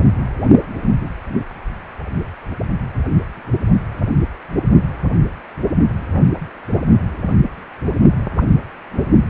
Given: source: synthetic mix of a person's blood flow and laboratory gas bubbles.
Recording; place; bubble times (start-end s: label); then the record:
Doppler ultrasound of blood flow; precordium
8.37-8.44 s: bubbles
From the record:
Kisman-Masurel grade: 111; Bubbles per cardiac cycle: 1 to 2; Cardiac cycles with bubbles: 1 to 10%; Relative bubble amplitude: barely perceptible (0.100 to 0.250); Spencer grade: 1 (occasional bubble signal discernible with the cardiac motion signal, with majority of cardiac periods free of bubbles); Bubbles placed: only in the low amplitude regions of the cardiac cycle